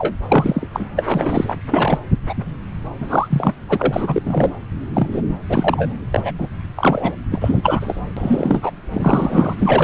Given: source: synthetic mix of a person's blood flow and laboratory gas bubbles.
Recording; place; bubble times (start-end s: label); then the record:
Doppler ultrasound of blood flow; subclavian vein
0.00-0.14 s: bubbles
0.28-0.69 s: bubbles
0.73-0.86 s: bubbles
0.95-1.55 s: bubbles
1.71-1.99 s: bubbles
2.29-2.34 s: bubbles
3.00-3.54 s: bubbles
3.69-4.51 s: bubbles
4.93-5.07 s: bubbles
5.12-5.21 s: bubbles
5.49-5.94 s: bubbles
6.12-6.31 s: bubbles
6.38-6.47 s: bubbles
6.76-7.14 s: bubbles
7.31-8.01 s: bubbles
8.17-8.71 s: bubbles
8.93-9.55 s: bubbles
9.59-9.84 s: bubbles
From the record:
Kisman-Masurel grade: 343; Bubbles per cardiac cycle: rolling drumbeat, 9 or more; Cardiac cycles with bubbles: 100%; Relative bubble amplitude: loud (0.450 to 0.775); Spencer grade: 3 (all of the cardiac periods contain showers or single bubble signals, but not dominating or overriding the cardiac motion signals); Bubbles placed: anywhere in the cardiac cycle